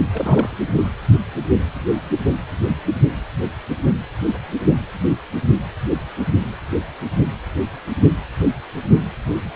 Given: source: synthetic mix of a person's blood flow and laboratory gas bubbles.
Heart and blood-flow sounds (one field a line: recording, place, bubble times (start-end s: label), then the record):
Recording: Doppler ultrasound of blood flow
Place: precordium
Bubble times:
0.13-0.55 s: bubbles
0.73-0.88 s: bubbles
From the record:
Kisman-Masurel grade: 211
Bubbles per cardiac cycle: several, 3 to 8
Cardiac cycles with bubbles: 1 to 10%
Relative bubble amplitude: barely perceptible (0.100 to 0.250)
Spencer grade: 1 (occasional bubble signal discernible with the cardiac motion signal, with majority of cardiac periods free of bubbles)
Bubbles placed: only in the low amplitude regions of the cardiac cycle